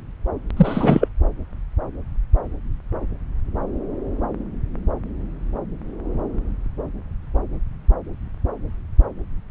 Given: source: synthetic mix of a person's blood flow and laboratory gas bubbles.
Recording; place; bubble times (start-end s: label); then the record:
Doppler ultrasound of blood flow; subclavian vein
0.56-1.08 s: bubbles
From the record:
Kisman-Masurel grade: 213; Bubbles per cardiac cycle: several, 3 to 8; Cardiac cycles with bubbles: 1 to 10%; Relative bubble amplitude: loud (0.450 to 0.775); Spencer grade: 1 (occasional bubble signal discernible with the cardiac motion signal, with majority of cardiac periods free of bubbles); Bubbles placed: anywhere in the cardiac cycle